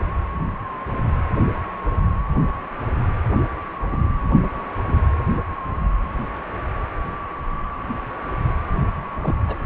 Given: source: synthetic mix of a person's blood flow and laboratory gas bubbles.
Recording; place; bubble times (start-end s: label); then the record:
Doppler ultrasound of blood flow; precordium
3.91-4.18 s: bubbles
4.21-4.28 s: bubbles
9.22-9.36 s: bubbles
9.46-9.57 s: bubbles
From the record:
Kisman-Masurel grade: 121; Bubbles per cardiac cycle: 1 to 2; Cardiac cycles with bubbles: 10 to 50%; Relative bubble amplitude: barely perceptible (0.100 to 0.250); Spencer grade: 2 (many but less than half of the cardiac periods contain bubble signals, singularly or in groups); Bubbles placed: only in the low amplitude regions of the cardiac cycle